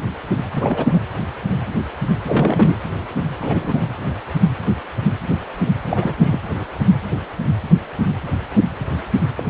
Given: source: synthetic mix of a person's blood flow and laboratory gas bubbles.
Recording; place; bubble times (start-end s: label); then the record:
Doppler ultrasound of blood flow; precordium
0.55-1.02 s: bubbles
2.25-2.79 s: bubbles
3.40-3.83 s: bubbles
5.87-6.14 s: bubbles
6.18-6.38 s: bubbles
9.37-9.44 s: bubbles
From the record:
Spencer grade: 2 (many but less than half of the cardiac periods contain bubble signals, singularly or in groups); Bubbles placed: anywhere in the cardiac cycle